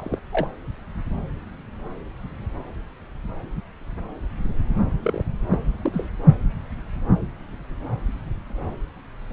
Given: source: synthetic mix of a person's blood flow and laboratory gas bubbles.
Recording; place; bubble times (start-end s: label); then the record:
Doppler ultrasound of blood flow; subclavian vein
0.00-0.18 s: bubbles
0.32-0.47 s: bubbles
5.02-5.24 s: bubbles
5.50-5.58 s: bubbles
5.81-6.08 s: bubbles
From the record:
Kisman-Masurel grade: 121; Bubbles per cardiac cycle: 1 to 2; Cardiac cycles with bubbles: 10 to 50%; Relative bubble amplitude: barely perceptible (0.100 to 0.250); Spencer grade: 2 (many but less than half of the cardiac periods contain bubble signals, singularly or in groups); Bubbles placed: anywhere in the cardiac cycle